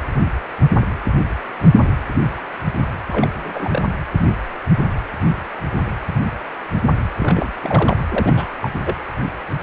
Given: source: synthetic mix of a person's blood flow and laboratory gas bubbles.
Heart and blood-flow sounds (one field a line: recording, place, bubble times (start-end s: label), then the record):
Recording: Doppler ultrasound of blood flow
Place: precordium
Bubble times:
3.08-3.85 s: bubbles
7.18-7.57 s: bubbles
7.62-7.97 s: bubbles
8.08-8.47 s: bubbles
8.62-8.70 s: bubbles
8.79-8.93 s: bubbles
From the record:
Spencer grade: 2 (many but less than half of the cardiac periods contain bubble signals, singularly or in groups)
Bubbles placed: anywhere in the cardiac cycle